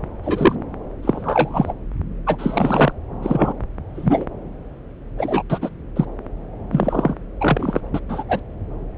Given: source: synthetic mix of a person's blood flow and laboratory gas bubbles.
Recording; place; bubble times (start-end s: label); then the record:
Doppler ultrasound of blood flow; subclavian vein
0.23-0.55 s: bubbles
1.02-1.72 s: bubbles
2.26-2.92 s: bubbles
3.22-3.54 s: bubbles
3.95-4.26 s: bubbles
5.18-5.42 s: bubbles
5.50-5.58 s: bubbles
5.62-5.69 s: bubbles
5.96-6.05 s: bubbles
6.71-7.15 s: bubbles
7.40-7.81 s: bubbles
7.94-8.00 s: bubbles
8.09-8.24 s: bubbles
8.29-8.41 s: bubbles
From the record:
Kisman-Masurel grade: 243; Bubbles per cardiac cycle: several, 3 to 8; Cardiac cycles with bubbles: 100%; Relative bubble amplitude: loud (0.450 to 0.775); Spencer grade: 3 (all of the cardiac periods contain showers or single bubble signals, but not dominating or overriding the cardiac motion signals); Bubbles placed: anywhere in the cardiac cycle